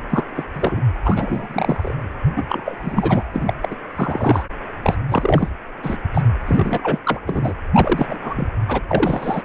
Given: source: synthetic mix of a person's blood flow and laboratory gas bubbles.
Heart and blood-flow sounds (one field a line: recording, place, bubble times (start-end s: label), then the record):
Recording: Doppler ultrasound of blood flow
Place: precordium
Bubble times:
0.09-0.24 s: bubbles
0.35-0.45 s: bubbles
0.53-0.82 s: bubbles
1.03-1.95 s: bubbles
2.36-2.46 s: bubbles
2.49-2.77 s: bubbles
2.81-3.24 s: bubbles
3.33-3.54 s: bubbles
3.62-3.76 s: bubbles
3.95-4.45 s: bubbles
4.82-4.97 s: bubbles
5.08-5.50 s: bubbles
5.82-5.96 s: bubbles
6.13-6.21 s: bubbles
6.46-6.99 s: bubbles
7.04-7.20 s: bubbles
7.26-7.53 s: bubbles
7.75-8.18 s: bubbles
8.23-8.48 s: bubbles
8.68-8.81 s: bubbles
8.88-9.45 s: bubbles
From the record:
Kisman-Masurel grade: 343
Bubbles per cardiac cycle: rolling drumbeat, 9 or more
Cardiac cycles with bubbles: 100%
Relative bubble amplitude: loud (0.450 to 0.775)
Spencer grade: 3 (all of the cardiac periods contain showers or single bubble signals, but not dominating or overriding the cardiac motion signals)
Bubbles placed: anywhere in the cardiac cycle